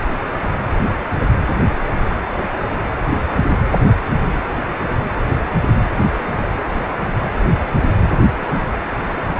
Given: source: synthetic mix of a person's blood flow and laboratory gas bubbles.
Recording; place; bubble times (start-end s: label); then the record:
Doppler ultrasound of blood flow; precordium
8.31-8.69 s: bubbles
From the record:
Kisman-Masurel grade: 111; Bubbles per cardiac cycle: 1 to 2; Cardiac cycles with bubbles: 1 to 10%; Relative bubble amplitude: barely perceptible (0.100 to 0.250); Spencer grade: 1 (occasional bubble signal discernible with the cardiac motion signal, with majority of cardiac periods free of bubbles); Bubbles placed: anywhere in the cardiac cycle